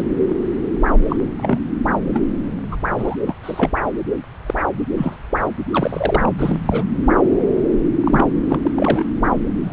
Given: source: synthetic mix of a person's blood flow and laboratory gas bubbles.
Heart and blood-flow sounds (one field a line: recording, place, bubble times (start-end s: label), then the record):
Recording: Doppler ultrasound of blood flow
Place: subclavian vein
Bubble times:
0.00-0.04 s: bubbles
1.09-1.17 s: bubbles
1.37-1.59 s: bubbles
2.13-2.22 s: bubbles
2.71-2.76 s: bubbles
2.98-3.16 s: bubbles
3.26-3.34 s: bubbles
3.43-3.73 s: bubbles
4.46-4.54 s: bubbles
4.57-4.62 s: bubbles
4.96-5.15 s: bubbles
5.71-6.33 s: bubbles
6.38-6.58 s: bubbles
6.66-6.83 s: bubbles
8.00-8.26 s: bubbles
8.49-8.71 s: bubbles
8.76-9.04 s: bubbles
9.64-9.72 s: bubbles
From the record:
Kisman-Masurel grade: 242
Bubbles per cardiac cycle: several, 3 to 8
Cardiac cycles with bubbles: 100%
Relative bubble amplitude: moderate (0.250 to 0.450)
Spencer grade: 3 (all of the cardiac periods contain showers or single bubble signals, but not dominating or overriding the cardiac motion signals)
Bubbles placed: anywhere in the cardiac cycle